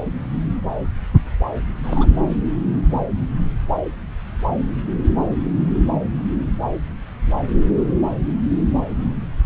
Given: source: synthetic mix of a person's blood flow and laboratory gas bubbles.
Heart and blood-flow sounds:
Doppler ultrasound of blood flow; subclavian vein
1.84-2.06 s: bubbles
From the record:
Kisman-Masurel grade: 112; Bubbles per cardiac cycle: 1 to 2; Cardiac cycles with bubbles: 1 to 10%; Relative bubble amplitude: moderate (0.250 to 0.450); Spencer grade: 1 (occasional bubble signal discernible with the cardiac motion signal, with majority of cardiac periods free of bubbles); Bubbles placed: anywhere in the cardiac cycle

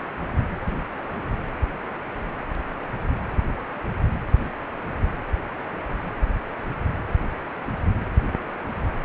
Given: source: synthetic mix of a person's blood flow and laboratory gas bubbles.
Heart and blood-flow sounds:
Doppler ultrasound of blood flow; precordium
no bubbles
From the record:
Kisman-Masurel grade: 000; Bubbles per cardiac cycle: 0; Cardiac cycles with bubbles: 0%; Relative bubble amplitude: no bubbles discernible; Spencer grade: 0 (complete lack of bubble signals)

